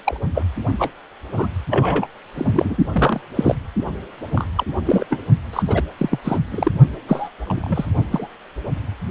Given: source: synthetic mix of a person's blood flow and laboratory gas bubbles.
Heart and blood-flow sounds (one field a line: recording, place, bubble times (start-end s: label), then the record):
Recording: Doppler ultrasound of blood flow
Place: precordium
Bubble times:
0.04-0.17 s: bubbles
0.34-0.43 s: bubbles
0.79-0.91 s: bubbles
1.34-1.55 s: bubbles
1.70-2.07 s: bubbles
2.35-2.77 s: bubbles
2.92-3.20 s: bubbles
3.35-3.55 s: bubbles
4.33-4.47 s: bubbles
4.56-4.64 s: bubbles
4.85-5.05 s: bubbles
5.10-5.19 s: bubbles
5.52-5.63 s: bubbles
5.67-5.82 s: bubbles
5.97-6.19 s: bubbles
6.25-6.38 s: bubbles
6.51-6.71 s: bubbles
7.08-7.29 s: bubbles
7.46-7.85 s: bubbles
8.11-8.28 s: bubbles
From the record:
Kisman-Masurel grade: 242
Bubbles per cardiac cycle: several, 3 to 8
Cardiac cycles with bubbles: 100%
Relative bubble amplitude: moderate (0.250 to 0.450)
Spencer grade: 3 (all of the cardiac periods contain showers or single bubble signals, but not dominating or overriding the cardiac motion signals)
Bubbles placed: only in the low amplitude regions of the cardiac cycle